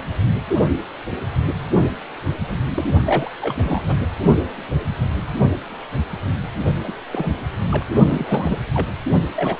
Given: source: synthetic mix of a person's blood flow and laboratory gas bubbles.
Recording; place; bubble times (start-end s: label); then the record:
Doppler ultrasound of blood flow; precordium
2.48-2.58 s: bubbles
2.67-2.84 s: bubbles
3.05-3.31 s: bubbles
3.40-3.96 s: bubbles
6.84-6.93 s: bubbles
7.12-7.32 s: bubbles
7.71-7.85 s: bubbles
8.06-8.58 s: bubbles
8.73-8.90 s: bubbles
9.35-9.60 s: bubbles
From the record:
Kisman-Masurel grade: 232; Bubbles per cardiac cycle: several, 3 to 8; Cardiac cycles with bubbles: 50 to 99%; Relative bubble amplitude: moderate (0.250 to 0.450); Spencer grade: 3 (all of the cardiac periods contain showers or single bubble signals, but not dominating or overriding the cardiac motion signals); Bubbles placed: only in the low amplitude regions of the cardiac cycle